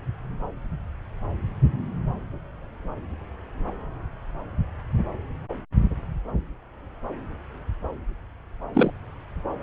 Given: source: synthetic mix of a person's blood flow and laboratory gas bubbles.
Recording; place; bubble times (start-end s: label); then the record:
Doppler ultrasound of blood flow; subclavian vein
8.74-8.91 s: bubbles
From the record:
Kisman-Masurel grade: 113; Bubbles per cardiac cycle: 1 to 2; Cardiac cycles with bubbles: 1 to 10%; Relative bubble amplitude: loud (0.450 to 0.775); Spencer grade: 1 (occasional bubble signal discernible with the cardiac motion signal, with majority of cardiac periods free of bubbles); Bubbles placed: anywhere in the cardiac cycle